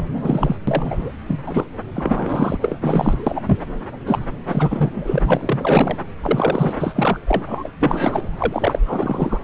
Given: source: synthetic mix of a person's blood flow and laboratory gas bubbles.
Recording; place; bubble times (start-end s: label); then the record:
Doppler ultrasound of blood flow; subclavian vein
0.00-0.04 s: bubbles
0.25-0.57 s: bubbles
0.67-1.13 s: bubbles
1.27-1.36 s: bubbles
1.46-1.66 s: bubbles
1.94-2.57 s: bubbles
2.61-2.79 s: bubbles
2.81-3.17 s: bubbles
3.27-3.58 s: bubbles
4.05-4.24 s: bubbles
4.48-5.98 s: bubbles
6.21-6.73 s: bubbles
6.79-7.20 s: bubbles
7.27-7.69 s: bubbles
7.81-8.23 s: bubbles
8.38-8.79 s: bubbles
8.87-9.38 s: bubbles
From the record:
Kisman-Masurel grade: 243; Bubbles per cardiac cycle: several, 3 to 8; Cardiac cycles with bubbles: 100%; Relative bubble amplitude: loud (0.450 to 0.775); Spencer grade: 3 (all of the cardiac periods contain showers or single bubble signals, but not dominating or overriding the cardiac motion signals); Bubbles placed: anywhere in the cardiac cycle